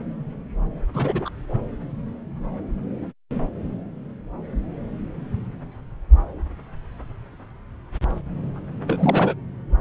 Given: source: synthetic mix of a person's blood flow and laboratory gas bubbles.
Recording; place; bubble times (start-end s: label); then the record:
Doppler ultrasound of blood flow; subclavian vein
0.94-1.30 s: bubbles
8.87-9.34 s: bubbles
From the record:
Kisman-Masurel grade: 212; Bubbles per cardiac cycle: several, 3 to 8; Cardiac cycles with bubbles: 1 to 10%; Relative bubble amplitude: moderate (0.250 to 0.450); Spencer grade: 1 (occasional bubble signal discernible with the cardiac motion signal, with majority of cardiac periods free of bubbles); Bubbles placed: anywhere in the cardiac cycle